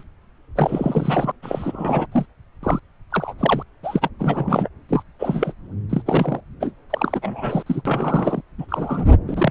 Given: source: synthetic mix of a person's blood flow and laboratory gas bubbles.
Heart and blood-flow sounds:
Doppler ultrasound of blood flow; subclavian vein
0.00-0.03 s: bubbles
0.55-1.32 s: bubbles
1.43-2.06 s: bubbles
2.11-2.25 s: bubbles
2.63-2.79 s: bubbles
3.11-3.33 s: bubbles
3.39-3.63 s: bubbles
3.83-4.08 s: bubbles
4.18-4.68 s: bubbles
4.89-5.03 s: bubbles
5.19-5.53 s: bubbles
5.90-6.02 s: bubbles
6.06-6.41 s: bubbles
6.61-6.71 s: bubbles
6.90-7.63 s: bubbles
7.66-7.82 s: bubbles
7.85-8.42 s: bubbles
8.58-8.66 s: bubbles
8.69-9.05 s: bubbles
9.28-9.51 s: bubbles
From the record:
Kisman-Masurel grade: 242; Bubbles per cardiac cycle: several, 3 to 8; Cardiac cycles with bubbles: 100%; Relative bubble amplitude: moderate (0.250 to 0.450); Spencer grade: 3 (all of the cardiac periods contain showers or single bubble signals, but not dominating or overriding the cardiac motion signals); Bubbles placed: anywhere in the cardiac cycle

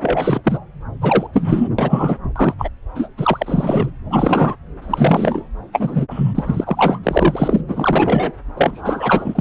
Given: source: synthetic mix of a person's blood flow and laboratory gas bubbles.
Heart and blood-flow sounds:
Doppler ultrasound of blood flow; subclavian vein
0.02-0.42 s: bubbles
0.44-0.58 s: bubbles
1.01-1.27 s: bubbles
1.33-1.69 s: bubbles
1.78-2.17 s: bubbles
2.36-2.54 s: bubbles
2.58-2.69 s: bubbles
2.95-3.08 s: bubbles
3.17-3.90 s: bubbles
4.10-4.55 s: bubbles
4.81-5.42 s: bubbles
5.73-6.06 s: bubbles
6.11-6.64 s: bubbles
6.67-7.00 s: bubbles
7.03-7.64 s: bubbles
7.67-8.31 s: bubbles
8.57-9.41 s: bubbles
From the record:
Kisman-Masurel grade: 243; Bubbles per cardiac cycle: several, 3 to 8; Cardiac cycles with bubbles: 100%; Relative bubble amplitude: loud (0.450 to 0.775); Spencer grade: 3 (all of the cardiac periods contain showers or single bubble signals, but not dominating or overriding the cardiac motion signals); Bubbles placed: anywhere in the cardiac cycle

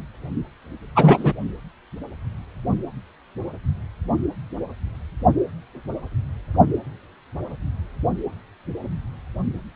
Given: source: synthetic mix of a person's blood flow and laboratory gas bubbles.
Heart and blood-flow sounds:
Doppler ultrasound of blood flow; precordium
0.95-1.33 s: bubbles
From the record:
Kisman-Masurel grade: 213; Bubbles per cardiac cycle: several, 3 to 8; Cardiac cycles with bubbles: 1 to 10%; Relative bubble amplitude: loud (0.450 to 0.775); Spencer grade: 1 (occasional bubble signal discernible with the cardiac motion signal, with majority of cardiac periods free of bubbles); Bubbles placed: anywhere in the cardiac cycle

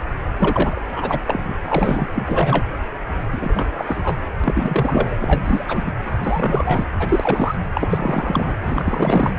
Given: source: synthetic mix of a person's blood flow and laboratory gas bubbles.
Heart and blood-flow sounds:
Doppler ultrasound of blood flow; precordium
0.39-0.83 s: bubbles
0.96-1.20 s: bubbles
1.27-1.54 s: bubbles
1.65-2.08 s: bubbles
2.15-2.67 s: bubbles
3.32-4.21 s: bubbles
4.44-5.15 s: bubbles
5.20-5.65 s: bubbles
5.68-5.92 s: bubbles
6.22-6.84 s: bubbles
6.99-7.55 s: bubbles
7.74-8.57 s: bubbles
8.62-9.36 s: bubbles
From the record:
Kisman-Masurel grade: 343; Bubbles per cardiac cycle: rolling drumbeat, 9 or more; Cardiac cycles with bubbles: 100%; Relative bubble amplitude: loud (0.450 to 0.775); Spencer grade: 3 (all of the cardiac periods contain showers or single bubble signals, but not dominating or overriding the cardiac motion signals); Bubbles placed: anywhere in the cardiac cycle

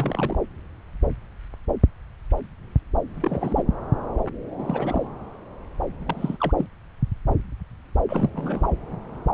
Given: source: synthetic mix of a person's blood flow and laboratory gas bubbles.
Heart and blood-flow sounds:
Doppler ultrasound of blood flow; subclavian vein
0.00-0.38 s: bubbles
3.14-3.63 s: bubbles
4.58-5.08 s: bubbles
6.00-6.37 s: bubbles
6.40-6.53 s: bubbles
6.58-6.66 s: bubbles
8.08-8.71 s: bubbles
From the record:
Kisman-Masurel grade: 221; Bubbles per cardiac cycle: several, 3 to 8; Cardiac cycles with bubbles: 10 to 50%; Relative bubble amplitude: barely perceptible (0.100 to 0.250); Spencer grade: 2 (many but less than half of the cardiac periods contain bubble signals, singularly or in groups); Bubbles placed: anywhere in the cardiac cycle

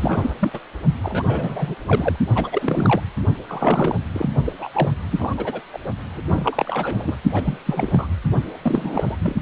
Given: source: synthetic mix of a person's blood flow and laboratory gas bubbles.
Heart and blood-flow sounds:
Doppler ultrasound of blood flow; precordium
0.00-0.34 s: bubbles
0.39-0.60 s: bubbles
1.03-1.23 s: bubbles
1.27-1.75 s: bubbles
1.85-2.17 s: bubbles
2.35-3.01 s: bubbles
3.48-3.96 s: bubbles
4.13-4.29 s: bubbles
4.45-4.53 s: bubbles
4.59-4.69 s: bubbles
4.74-4.91 s: bubbles
5.10-5.61 s: bubbles
5.73-5.79 s: bubbles
6.13-7.17 s: bubbles
7.32-7.58 s: bubbles
7.66-8.07 s: bubbles
8.62-9.17 s: bubbles
9.20-9.36 s: bubbles
From the record:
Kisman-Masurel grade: 342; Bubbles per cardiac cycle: rolling drumbeat, 9 or more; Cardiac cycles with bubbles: 100%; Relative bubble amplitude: moderate (0.250 to 0.450); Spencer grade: 3 (all of the cardiac periods contain showers or single bubble signals, but not dominating or overriding the cardiac motion signals); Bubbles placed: only in the low amplitude regions of the cardiac cycle

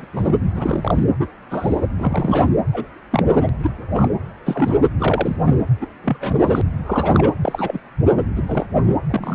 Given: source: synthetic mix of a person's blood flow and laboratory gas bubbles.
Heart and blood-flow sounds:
Doppler ultrasound of blood flow; precordium
0.00-0.06 s: bubbles
0.13-0.35 s: bubbles
0.54-1.04 s: bubbles
1.20-1.28 s: bubbles
1.50-1.81 s: bubbles
1.97-2.48 s: bubbles
2.73-2.86 s: bubbles
3.11-3.23 s: bubbles
3.25-3.50 s: bubbles
3.63-3.71 s: bubbles
3.94-4.08 s: bubbles
4.46-4.79 s: bubbles
4.98-5.37 s: bubbles
5.44-5.58 s: bubbles
5.81-5.87 s: bubbles
6.04-6.17 s: bubbles
6.21-6.35 s: bubbles
6.45-6.62 s: bubbles
6.86-7.32 s: bubbles
7.42-7.80 s: bubbles
8.35-8.43 s: bubbles
8.46-8.65 s: bubbles
8.86-8.97 s: bubbles
9.09-9.35 s: bubbles
From the record:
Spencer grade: 3 (all of the cardiac periods contain showers or single bubble signals, but not dominating or overriding the cardiac motion signals); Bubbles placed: anywhere in the cardiac cycle

